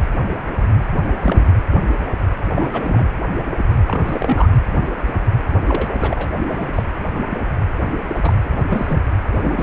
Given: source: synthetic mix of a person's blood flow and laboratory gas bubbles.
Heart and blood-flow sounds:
Doppler ultrasound of blood flow; precordium
1.03-1.53 s: bubbles
2.53-3.08 s: bubbles
3.88-4.48 s: bubbles
5.68-6.29 s: bubbles
6.47-6.68 s: bubbles
6.73-6.84 s: bubbles
7.21-7.25 s: bubbles
7.30-7.38 s: bubbles
8.09-8.33 s: bubbles
8.45-8.48 s: bubbles
8.69-9.00 s: bubbles
9.31-9.63 s: bubbles
From the record:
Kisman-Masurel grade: 232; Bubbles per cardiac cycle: several, 3 to 8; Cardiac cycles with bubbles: 50 to 99%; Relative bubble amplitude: moderate (0.250 to 0.450); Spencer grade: 3 (all of the cardiac periods contain showers or single bubble signals, but not dominating or overriding the cardiac motion signals); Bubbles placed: anywhere in the cardiac cycle

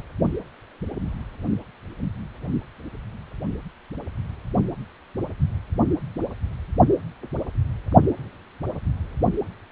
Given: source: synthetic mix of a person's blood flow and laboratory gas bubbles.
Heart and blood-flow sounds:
Doppler ultrasound of blood flow; precordium
no bubbles
From the record:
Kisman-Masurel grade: 000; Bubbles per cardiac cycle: 0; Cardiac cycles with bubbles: 0%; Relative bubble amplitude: no bubbles discernible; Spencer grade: 0 (complete lack of bubble signals)

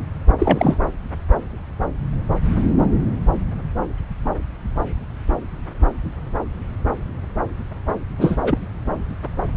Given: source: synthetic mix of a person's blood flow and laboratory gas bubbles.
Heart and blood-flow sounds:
Doppler ultrasound of blood flow; subclavian vein
0.39-0.76 s: bubbles
8.18-8.37 s: bubbles
8.42-8.58 s: bubbles
From the record:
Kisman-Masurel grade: 213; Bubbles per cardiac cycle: several, 3 to 8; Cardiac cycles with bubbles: 1 to 10%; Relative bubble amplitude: loud (0.450 to 0.775); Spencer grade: 1 (occasional bubble signal discernible with the cardiac motion signal, with majority of cardiac periods free of bubbles); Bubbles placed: anywhere in the cardiac cycle

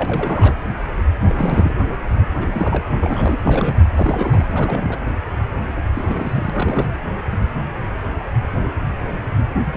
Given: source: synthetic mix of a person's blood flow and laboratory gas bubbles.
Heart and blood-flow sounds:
Doppler ultrasound of blood flow; precordium
0.00-0.54 s: bubbles
1.21-1.74 s: bubbles
2.35-2.86 s: bubbles
3.00-3.39 s: bubbles
3.43-3.86 s: bubbles
3.97-4.45 s: bubbles
4.52-4.96 s: bubbles
5.94-6.88 s: bubbles
9.74-9.77 s: bubbles
From the record:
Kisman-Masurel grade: 332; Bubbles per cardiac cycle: rolling drumbeat, 9 or more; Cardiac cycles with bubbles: 50 to 99%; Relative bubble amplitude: moderate (0.250 to 0.450); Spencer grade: 3 (all of the cardiac periods contain showers or single bubble signals, but not dominating or overriding the cardiac motion signals); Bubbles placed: anywhere in the cardiac cycle

